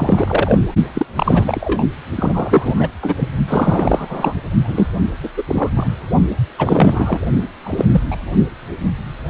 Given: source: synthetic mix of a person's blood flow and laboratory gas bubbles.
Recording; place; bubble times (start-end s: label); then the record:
Doppler ultrasound of blood flow; precordium
0.00-0.58 s: bubbles
0.95-1.06 s: bubbles
1.15-1.86 s: bubbles
2.15-2.88 s: bubbles
3.00-3.14 s: bubbles
3.17-3.29 s: bubbles
3.47-4.35 s: bubbles
4.64-4.88 s: bubbles
5.23-5.29 s: bubbles
5.37-5.43 s: bubbles
5.47-5.70 s: bubbles
5.75-5.95 s: bubbles
6.58-7.19 s: bubbles
7.63-7.86 s: bubbles
7.92-8.02 s: bubbles
8.11-8.17 s: bubbles
From the record:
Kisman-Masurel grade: 333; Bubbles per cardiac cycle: rolling drumbeat, 9 or more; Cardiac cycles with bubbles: 50 to 99%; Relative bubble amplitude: loud (0.450 to 0.775); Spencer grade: 3 (all of the cardiac periods contain showers or single bubble signals, but not dominating or overriding the cardiac motion signals); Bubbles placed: only in the low amplitude regions of the cardiac cycle